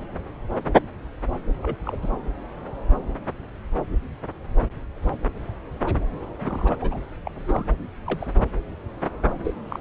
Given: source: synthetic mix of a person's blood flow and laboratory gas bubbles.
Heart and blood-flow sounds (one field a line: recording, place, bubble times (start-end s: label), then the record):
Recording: Doppler ultrasound of blood flow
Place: subclavian vein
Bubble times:
1.62-1.77 s: bubbles
1.85-1.96 s: bubbles
2.02-2.08 s: bubbles
6.41-6.76 s: bubbles
6.81-6.97 s: bubbles
7.25-7.30 s: bubbles
7.47-7.66 s: bubbles
8.06-8.30 s: bubbles
9.45-9.54 s: bubbles
9.70-9.80 s: bubbles
From the record:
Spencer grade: 2 (many but less than half of the cardiac periods contain bubble signals, singularly or in groups)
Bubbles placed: anywhere in the cardiac cycle